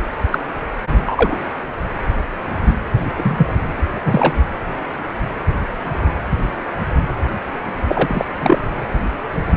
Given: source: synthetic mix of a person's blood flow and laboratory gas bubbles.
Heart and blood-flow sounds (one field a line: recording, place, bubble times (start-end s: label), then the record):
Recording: Doppler ultrasound of blood flow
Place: precordium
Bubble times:
0.00-0.02 s: bubbles
0.31-0.40 s: bubbles
0.98-1.38 s: bubbles
2.65-2.74 s: bubbles
3.17-3.55 s: bubbles
3.96-4.02 s: bubbles
4.05-4.34 s: bubbles
7.88-8.25 s: bubbles
8.37-8.63 s: bubbles
From the record:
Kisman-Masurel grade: 223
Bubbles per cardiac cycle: several, 3 to 8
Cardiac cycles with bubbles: 10 to 50%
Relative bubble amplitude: loud (0.450 to 0.775)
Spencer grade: 2 (many but less than half of the cardiac periods contain bubble signals, singularly or in groups)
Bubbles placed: anywhere in the cardiac cycle